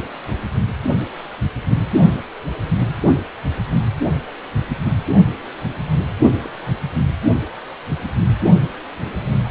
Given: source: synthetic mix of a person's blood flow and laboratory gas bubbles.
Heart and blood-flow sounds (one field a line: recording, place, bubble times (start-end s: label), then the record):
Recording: Doppler ultrasound of blood flow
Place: precordium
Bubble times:
6.35-6.50 s: bubbles
7.98-8.21 s: bubbles
9.26-9.29 s: bubbles
9.45-9.49 s: bubbles
From the record:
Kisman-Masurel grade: 121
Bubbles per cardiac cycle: 1 to 2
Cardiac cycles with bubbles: 10 to 50%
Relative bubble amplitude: barely perceptible (0.100 to 0.250)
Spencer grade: 2 (many but less than half of the cardiac periods contain bubble signals, singularly or in groups)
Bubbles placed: only in the low amplitude regions of the cardiac cycle